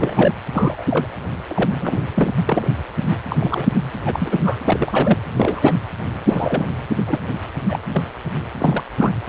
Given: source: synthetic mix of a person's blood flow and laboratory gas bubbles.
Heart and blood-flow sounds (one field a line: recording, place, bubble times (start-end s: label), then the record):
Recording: Doppler ultrasound of blood flow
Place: precordium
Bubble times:
0.00-0.35 s: bubbles
0.53-0.83 s: bubbles
0.90-1.07 s: bubbles
1.47-2.02 s: bubbles
2.14-2.34 s: bubbles
2.46-2.69 s: bubbles
3.10-3.17 s: bubbles
3.29-3.36 s: bubbles
3.40-3.69 s: bubbles
3.75-3.80 s: bubbles
4.05-4.62 s: bubbles
4.67-5.19 s: bubbles
5.37-5.75 s: bubbles
6.26-6.71 s: bubbles
6.99-7.02 s: bubbles
7.07-7.21 s: bubbles
7.67-7.79 s: bubbles
7.93-8.02 s: bubbles
8.60-8.84 s: bubbles
8.99-9.11 s: bubbles
9.26-9.29 s: bubbles
From the record:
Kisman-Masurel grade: 242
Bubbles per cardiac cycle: several, 3 to 8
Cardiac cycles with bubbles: 100%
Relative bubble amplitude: moderate (0.250 to 0.450)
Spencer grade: 3 (all of the cardiac periods contain showers or single bubble signals, but not dominating or overriding the cardiac motion signals)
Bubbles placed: anywhere in the cardiac cycle